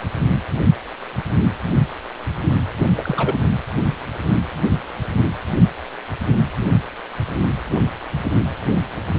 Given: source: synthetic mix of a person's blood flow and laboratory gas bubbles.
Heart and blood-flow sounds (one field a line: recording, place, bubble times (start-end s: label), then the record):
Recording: Doppler ultrasound of blood flow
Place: precordium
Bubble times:
2.96-3.40 s: bubbles
From the record:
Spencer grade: 1 (occasional bubble signal discernible with the cardiac motion signal, with majority of cardiac periods free of bubbles)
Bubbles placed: anywhere in the cardiac cycle